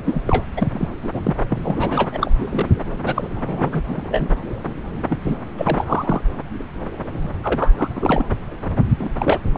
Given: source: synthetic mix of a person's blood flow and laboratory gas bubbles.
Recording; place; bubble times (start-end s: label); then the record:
Doppler ultrasound of blood flow; subclavian vein
0.05-0.21 s: bubbles
0.27-0.43 s: bubbles
0.57-0.68 s: bubbles
0.71-0.89 s: bubbles
1.02-1.10 s: bubbles
1.13-1.34 s: bubbles
1.49-1.61 s: bubbles
1.65-2.31 s: bubbles
2.40-2.46 s: bubbles
2.50-2.69 s: bubbles
3.04-3.27 s: bubbles
3.36-3.82 s: bubbles
3.88-4.34 s: bubbles
5.09-5.21 s: bubbles
5.24-5.35 s: bubbles
5.57-6.21 s: bubbles
7.43-7.72 s: bubbles
7.77-7.88 s: bubbles
7.93-8.24 s: bubbles
8.86-9.38 s: bubbles
9.54-9.58 s: bubbles
From the record:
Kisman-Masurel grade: 332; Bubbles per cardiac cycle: rolling drumbeat, 9 or more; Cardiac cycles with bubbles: 50 to 99%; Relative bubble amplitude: moderate (0.250 to 0.450); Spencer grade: 3 (all of the cardiac periods contain showers or single bubble signals, but not dominating or overriding the cardiac motion signals); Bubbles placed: anywhere in the cardiac cycle